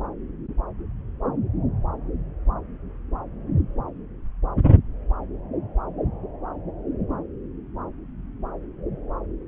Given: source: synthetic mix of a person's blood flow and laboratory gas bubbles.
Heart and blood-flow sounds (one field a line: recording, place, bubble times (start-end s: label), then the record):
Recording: Doppler ultrasound of blood flow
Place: subclavian vein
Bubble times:
no bubbles
From the record:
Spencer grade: 0 (complete lack of bubble signals)